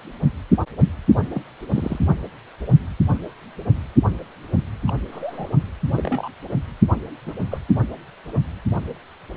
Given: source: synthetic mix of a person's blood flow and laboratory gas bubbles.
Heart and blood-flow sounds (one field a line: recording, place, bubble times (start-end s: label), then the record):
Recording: Doppler ultrasound of blood flow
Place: precordium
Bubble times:
1.33-1.42 s: bubbles
1.72-1.99 s: bubbles
4.87-4.92 s: bubbles
5.11-5.49 s: bubbles
5.96-6.29 s: bubbles
7.25-7.34 s: bubbles
7.50-7.58 s: bubbles
From the record:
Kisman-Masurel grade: 121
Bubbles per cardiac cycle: 1 to 2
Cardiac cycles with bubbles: 10 to 50%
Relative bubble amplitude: barely perceptible (0.100 to 0.250)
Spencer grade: 2 (many but less than half of the cardiac periods contain bubble signals, singularly or in groups)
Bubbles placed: anywhere in the cardiac cycle